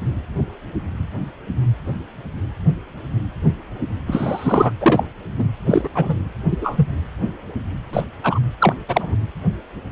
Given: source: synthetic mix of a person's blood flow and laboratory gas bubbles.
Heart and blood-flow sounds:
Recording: Doppler ultrasound of blood flow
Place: precordium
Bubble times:
4.06-4.72 s: bubbles
4.81-5.06 s: bubbles
5.38-5.48 s: bubbles
5.66-5.89 s: bubbles
5.95-6.16 s: bubbles
6.51-6.58 s: bubbles
6.61-6.88 s: bubbles
7.93-8.04 s: bubbles
8.22-8.39 s: bubbles
8.60-8.77 s: bubbles
8.88-9.15 s: bubbles
From the record:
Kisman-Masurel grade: 233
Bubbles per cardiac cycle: several, 3 to 8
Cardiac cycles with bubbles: 50 to 99%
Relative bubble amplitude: loud (0.450 to 0.775)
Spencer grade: 3 (all of the cardiac periods contain showers or single bubble signals, but not dominating or overriding the cardiac motion signals)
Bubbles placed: anywhere in the cardiac cycle

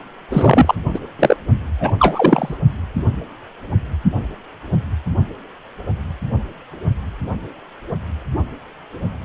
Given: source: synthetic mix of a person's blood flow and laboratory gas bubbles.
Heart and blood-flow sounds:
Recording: Doppler ultrasound of blood flow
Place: precordium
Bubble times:
0.30-0.75 s: bubbles
0.94-1.00 s: bubbles
1.19-1.36 s: bubbles
1.80-1.91 s: bubbles
1.99-2.58 s: bubbles
From the record:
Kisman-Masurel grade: 223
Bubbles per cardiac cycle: several, 3 to 8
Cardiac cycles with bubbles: 10 to 50%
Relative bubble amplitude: loud (0.450 to 0.775)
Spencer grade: 2 (many but less than half of the cardiac periods contain bubble signals, singularly or in groups)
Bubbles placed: only in the low amplitude regions of the cardiac cycle

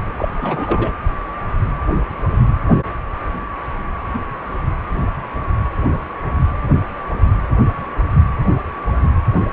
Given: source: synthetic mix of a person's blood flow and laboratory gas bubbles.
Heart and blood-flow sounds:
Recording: Doppler ultrasound of blood flow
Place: precordium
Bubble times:
0.16-0.28 s: bubbles
0.37-0.94 s: bubbles
From the record:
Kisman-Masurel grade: 212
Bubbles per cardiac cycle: several, 3 to 8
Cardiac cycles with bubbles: 1 to 10%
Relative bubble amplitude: moderate (0.250 to 0.450)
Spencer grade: 1 (occasional bubble signal discernible with the cardiac motion signal, with majority of cardiac periods free of bubbles)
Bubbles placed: anywhere in the cardiac cycle

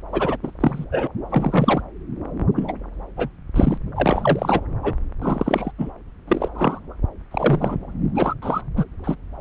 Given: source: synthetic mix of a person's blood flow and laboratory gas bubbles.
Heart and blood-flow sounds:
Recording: Doppler ultrasound of blood flow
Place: subclavian vein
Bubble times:
0.12-0.37 s: bubbles
0.43-0.51 s: bubbles
0.60-0.84 s: bubbles
0.92-1.07 s: bubbles
1.29-1.81 s: bubbles
2.56-2.73 s: bubbles
3.17-3.29 s: bubbles
3.54-3.78 s: bubbles
3.96-4.61 s: bubbles
4.83-4.94 s: bubbles
5.21-5.71 s: bubbles
5.78-5.91 s: bubbles
6.28-6.49 s: bubbles
6.54-6.79 s: bubbles
7.31-7.76 s: bubbles
8.15-8.34 s: bubbles
8.42-8.61 s: bubbles
8.76-8.84 s: bubbles
9.04-9.16 s: bubbles
From the record:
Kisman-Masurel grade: 243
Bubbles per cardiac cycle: several, 3 to 8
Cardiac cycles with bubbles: 100%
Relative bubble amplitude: loud (0.450 to 0.775)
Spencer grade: 3 (all of the cardiac periods contain showers or single bubble signals, but not dominating or overriding the cardiac motion signals)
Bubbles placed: anywhere in the cardiac cycle

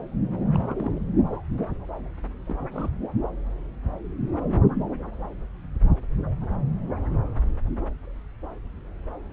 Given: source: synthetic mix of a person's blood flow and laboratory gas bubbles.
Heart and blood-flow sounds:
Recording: Doppler ultrasound of blood flow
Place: subclavian vein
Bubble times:
0.45-1.02 s: bubbles
2.46-2.56 s: bubbles
2.71-2.91 s: bubbles
From the record:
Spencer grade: 1 (occasional bubble signal discernible with the cardiac motion signal, with majority of cardiac periods free of bubbles)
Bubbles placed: anywhere in the cardiac cycle

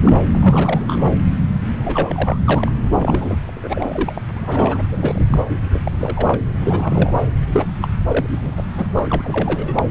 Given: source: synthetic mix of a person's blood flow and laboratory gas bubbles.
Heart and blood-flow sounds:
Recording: Doppler ultrasound of blood flow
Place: subclavian vein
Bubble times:
0.02-0.14 s: bubbles
0.33-0.84 s: bubbles
0.87-1.05 s: bubbles
1.77-2.38 s: bubbles
2.45-2.72 s: bubbles
2.92-3.37 s: bubbles
3.47-4.21 s: bubbles
4.36-4.82 s: bubbles
4.92-5.43 s: bubbles
5.48-5.56 s: bubbles
5.73-5.79 s: bubbles
5.84-5.92 s: bubbles
6.00-6.40 s: bubbles
6.61-7.12 s: bubbles
7.52-7.70 s: bubbles
7.82-7.88 s: bubbles
8.07-8.53 s: bubbles
8.56-8.63 s: bubbles
8.77-9.74 s: bubbles
9.78-9.83 s: bubbles
From the record:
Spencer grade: 3 (all of the cardiac periods contain showers or single bubble signals, but not dominating or overriding the cardiac motion signals)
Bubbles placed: anywhere in the cardiac cycle

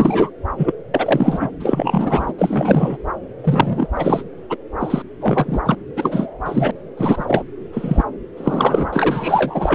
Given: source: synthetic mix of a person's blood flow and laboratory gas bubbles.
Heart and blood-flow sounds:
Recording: Doppler ultrasound of blood flow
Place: subclavian vein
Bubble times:
0.00-0.30 s: bubbles
0.56-0.72 s: bubbles
0.94-1.50 s: bubbles
1.59-2.33 s: bubbles
2.38-2.98 s: bubbles
3.42-3.88 s: bubbles
3.96-4.23 s: bubbles
4.50-4.56 s: bubbles
4.79-5.02 s: bubbles
5.20-5.61 s: bubbles
5.66-5.75 s: bubbles
5.96-6.26 s: bubbles
6.46-6.71 s: bubbles
6.97-7.43 s: bubbles
7.72-8.04 s: bubbles
8.36-8.90 s: bubbles
8.92-9.75 s: bubbles
From the record:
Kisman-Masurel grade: 343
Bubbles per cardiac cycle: rolling drumbeat, 9 or more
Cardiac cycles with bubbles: 100%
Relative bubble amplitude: loud (0.450 to 0.775)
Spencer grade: 3 (all of the cardiac periods contain showers or single bubble signals, but not dominating or overriding the cardiac motion signals)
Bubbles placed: anywhere in the cardiac cycle

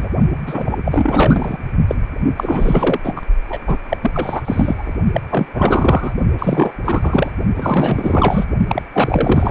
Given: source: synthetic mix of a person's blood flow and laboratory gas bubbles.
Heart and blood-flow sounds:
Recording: Doppler ultrasound of blood flow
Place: precordium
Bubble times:
0.00-0.09 s: bubbles
0.46-0.79 s: bubbles
0.85-1.57 s: bubbles
1.87-1.95 s: bubbles
2.37-3.00 s: bubbles
3.03-3.21 s: bubbles
3.48-3.60 s: bubbles
3.66-3.77 s: bubbles
3.89-3.97 s: bubbles
4.02-4.42 s: bubbles
4.45-4.95 s: bubbles
5.12-5.21 s: bubbles
5.29-5.48 s: bubbles
5.54-6.14 s: bubbles
6.39-6.74 s: bubbles
6.83-7.33 s: bubbles
7.56-8.45 s: bubbles
8.68-8.82 s: bubbles
8.93-9.51 s: bubbles
From the record:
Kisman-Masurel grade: 444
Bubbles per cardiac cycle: continuous sound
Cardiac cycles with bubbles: 100%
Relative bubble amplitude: maximal (0.775 to 0.999)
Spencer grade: 4 (maximum detectable bubble signal sounding continuously throughout systole and diastole of every cardiac period, and overriding the amplitude of the normal cardiac signals)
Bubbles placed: only in the low amplitude regions of the cardiac cycle

